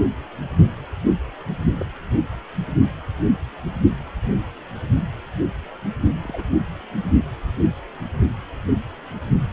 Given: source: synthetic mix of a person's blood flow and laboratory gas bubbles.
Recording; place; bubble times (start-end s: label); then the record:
Doppler ultrasound of blood flow; precordium
1.77-1.86 s: bubbles
6.24-6.45 s: bubbles
From the record:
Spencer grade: 2 (many but less than half of the cardiac periods contain bubble signals, singularly or in groups); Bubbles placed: only in the low amplitude regions of the cardiac cycle